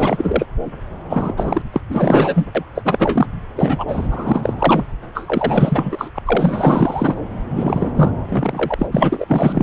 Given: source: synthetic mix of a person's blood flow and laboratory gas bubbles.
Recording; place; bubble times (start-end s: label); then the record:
Doppler ultrasound of blood flow; subclavian vein
0.00-0.46 s: bubbles
1.09-1.33 s: bubbles
1.36-1.62 s: bubbles
1.72-1.81 s: bubbles
1.88-2.46 s: bubbles
2.55-2.64 s: bubbles
2.75-3.26 s: bubbles
3.56-3.84 s: bubbles
3.87-4.54 s: bubbles
4.58-4.84 s: bubbles
5.14-6.11 s: bubbles
6.15-6.18 s: bubbles
6.25-7.15 s: bubbles
7.50-7.92 s: bubbles
7.95-8.12 s: bubbles
8.29-8.75 s: bubbles
8.78-8.87 s: bubbles
8.91-9.63 s: bubbles
From the record:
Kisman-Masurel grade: 444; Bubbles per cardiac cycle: continuous sound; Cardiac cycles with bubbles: 100%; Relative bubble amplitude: maximal (0.775 to 0.999); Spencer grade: 4 (maximum detectable bubble signal sounding continuously throughout systole and diastole of every cardiac period, and overriding the amplitude of the normal cardiac signals); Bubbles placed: anywhere in the cardiac cycle